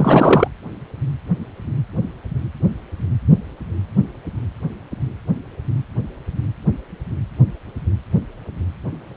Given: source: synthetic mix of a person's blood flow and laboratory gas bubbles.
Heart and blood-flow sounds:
Doppler ultrasound of blood flow; precordium
0.00-0.48 s: bubbles
From the record:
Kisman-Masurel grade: 213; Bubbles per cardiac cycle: several, 3 to 8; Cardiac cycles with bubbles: 1 to 10%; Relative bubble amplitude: loud (0.450 to 0.775); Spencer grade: 1 (occasional bubble signal discernible with the cardiac motion signal, with majority of cardiac periods free of bubbles); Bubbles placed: anywhere in the cardiac cycle

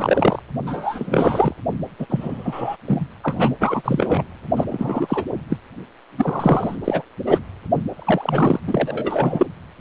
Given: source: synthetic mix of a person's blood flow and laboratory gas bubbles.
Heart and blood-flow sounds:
Doppler ultrasound of blood flow; precordium
0.00-0.42 s: bubbles
0.67-1.54 s: bubbles
1.99-2.06 s: bubbles
2.09-2.77 s: bubbles
2.87-3.07 s: bubbles
3.23-3.56 s: bubbles
3.60-4.23 s: bubbles
4.56-4.65 s: bubbles
4.69-5.24 s: bubbles
5.50-5.56 s: bubbles
6.18-6.76 s: bubbles
6.84-7.02 s: bubbles
7.26-7.39 s: bubbles
7.94-8.60 s: bubbles
8.67-9.46 s: bubbles
From the record:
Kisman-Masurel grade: 343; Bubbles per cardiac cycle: rolling drumbeat, 9 or more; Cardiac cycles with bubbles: 100%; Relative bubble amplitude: loud (0.450 to 0.775); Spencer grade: 3 (all of the cardiac periods contain showers or single bubble signals, but not dominating or overriding the cardiac motion signals); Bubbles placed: anywhere in the cardiac cycle

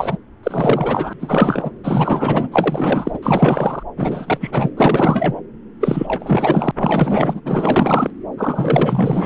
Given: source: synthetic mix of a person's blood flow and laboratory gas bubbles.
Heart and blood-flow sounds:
Doppler ultrasound of blood flow; subclavian vein
0.00-0.18 s: bubbles
0.43-1.13 s: bubbles
1.19-1.71 s: bubbles
1.83-2.48 s: bubbles
2.52-3.19 s: bubbles
3.23-3.83 s: bubbles
3.97-4.70 s: bubbles
4.77-5.41 s: bubbles
5.80-6.71 s: bubbles
6.77-7.41 s: bubbles
7.45-8.10 s: bubbles
8.38-9.26 s: bubbles
From the record:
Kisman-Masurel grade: 444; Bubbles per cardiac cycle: continuous sound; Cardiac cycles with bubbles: 100%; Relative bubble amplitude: maximal (0.775 to 0.999); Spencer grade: 4 (maximum detectable bubble signal sounding continuously throughout systole and diastole of every cardiac period, and overriding the amplitude of the normal cardiac signals); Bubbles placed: anywhere in the cardiac cycle

